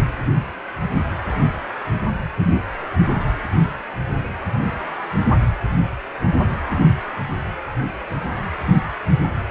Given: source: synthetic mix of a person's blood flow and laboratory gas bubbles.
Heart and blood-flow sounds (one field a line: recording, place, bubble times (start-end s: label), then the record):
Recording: Doppler ultrasound of blood flow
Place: precordium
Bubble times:
no bubbles
From the record:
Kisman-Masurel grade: 000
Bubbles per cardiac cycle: 0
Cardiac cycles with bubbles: 0%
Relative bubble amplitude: no bubbles discernible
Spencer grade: 0 (complete lack of bubble signals)